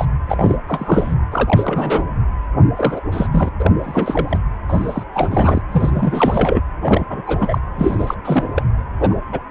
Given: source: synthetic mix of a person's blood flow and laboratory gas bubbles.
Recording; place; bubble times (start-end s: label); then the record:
Doppler ultrasound of blood flow; precordium
0.00-0.06 s: bubbles
0.28-0.57 s: bubbles
0.68-1.14 s: bubbles
1.31-2.06 s: bubbles
2.76-3.00 s: bubbles
3.11-3.27 s: bubbles
3.31-3.49 s: bubbles
3.58-3.71 s: bubbles
3.83-4.39 s: bubbles
4.68-5.04 s: bubbles
5.13-5.62 s: bubbles
5.71-6.61 s: bubbles
6.82-7.04 s: bubbles
7.10-7.21 s: bubbles
7.26-7.58 s: bubbles
7.76-8.15 s: bubbles
8.25-8.53 s: bubbles
8.56-8.63 s: bubbles
9.00-9.16 s: bubbles
9.32-9.40 s: bubbles
From the record:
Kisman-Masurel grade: 342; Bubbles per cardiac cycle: rolling drumbeat, 9 or more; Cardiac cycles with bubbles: 100%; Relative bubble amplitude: moderate (0.250 to 0.450); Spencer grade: 3 (all of the cardiac periods contain showers or single bubble signals, but not dominating or overriding the cardiac motion signals); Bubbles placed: anywhere in the cardiac cycle